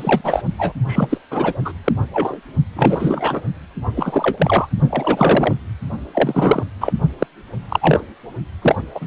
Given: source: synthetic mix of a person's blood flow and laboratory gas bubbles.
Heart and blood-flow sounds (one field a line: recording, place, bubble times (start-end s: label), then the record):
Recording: Doppler ultrasound of blood flow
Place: precordium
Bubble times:
0.00-0.21 s: bubbles
0.23-0.42 s: bubbles
0.58-0.73 s: bubbles
0.87-1.18 s: bubbles
1.30-1.53 s: bubbles
1.65-1.73 s: bubbles
1.84-1.92 s: bubbles
2.13-2.37 s: bubbles
2.75-3.42 s: bubbles
3.96-4.67 s: bubbles
4.89-5.55 s: bubbles
6.13-6.63 s: bubbles
6.80-6.92 s: bubbles
7.19-7.26 s: bubbles
7.68-8.04 s: bubbles
8.61-8.75 s: bubbles
8.94-9.06 s: bubbles
From the record:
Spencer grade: 3 (all of the cardiac periods contain showers or single bubble signals, but not dominating or overriding the cardiac motion signals)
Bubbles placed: only in the low amplitude regions of the cardiac cycle